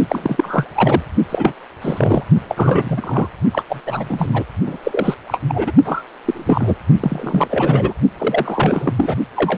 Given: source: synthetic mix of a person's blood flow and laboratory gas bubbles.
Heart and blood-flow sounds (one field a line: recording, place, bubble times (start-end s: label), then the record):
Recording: Doppler ultrasound of blood flow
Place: precordium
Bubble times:
0.09-0.65 s: bubbles
0.74-1.02 s: bubbles
1.29-1.53 s: bubbles
1.81-2.24 s: bubbles
2.48-3.27 s: bubbles
3.52-3.64 s: bubbles
3.69-3.80 s: bubbles
3.86-4.44 s: bubbles
4.66-4.77 s: bubbles
4.83-5.14 s: bubbles
5.27-5.39 s: bubbles
5.48-5.73 s: bubbles
5.84-6.02 s: bubbles
6.24-6.75 s: bubbles
7.00-7.93 s: bubbles
8.18-8.93 s: bubbles
8.96-9.16 s: bubbles
9.36-9.58 s: bubbles
From the record:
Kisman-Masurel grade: 333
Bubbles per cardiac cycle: rolling drumbeat, 9 or more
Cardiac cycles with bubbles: 50 to 99%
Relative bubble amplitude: loud (0.450 to 0.775)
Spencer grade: 3 (all of the cardiac periods contain showers or single bubble signals, but not dominating or overriding the cardiac motion signals)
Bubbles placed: only in the low amplitude regions of the cardiac cycle